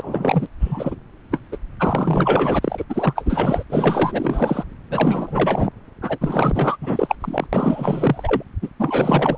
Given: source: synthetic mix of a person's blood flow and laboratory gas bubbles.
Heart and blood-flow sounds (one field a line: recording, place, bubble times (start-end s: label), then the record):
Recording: Doppler ultrasound of blood flow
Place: subclavian vein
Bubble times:
0.00-0.47 s: bubbles
0.60-0.96 s: bubbles
1.30-1.41 s: bubbles
1.52-1.57 s: bubbles
1.79-2.59 s: bubbles
2.62-2.84 s: bubbles
2.89-3.64 s: bubbles
3.70-4.64 s: bubbles
4.90-5.70 s: bubbles
6.02-6.18 s: bubbles
6.21-6.77 s: bubbles
6.81-7.16 s: bubbles
7.21-7.46 s: bubbles
7.53-8.43 s: bubbles
8.62-8.69 s: bubbles
8.79-9.38 s: bubbles
From the record:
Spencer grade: 4 (maximum detectable bubble signal sounding continuously throughout systole and diastole of every cardiac period, and overriding the amplitude of the normal cardiac signals)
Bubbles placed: anywhere in the cardiac cycle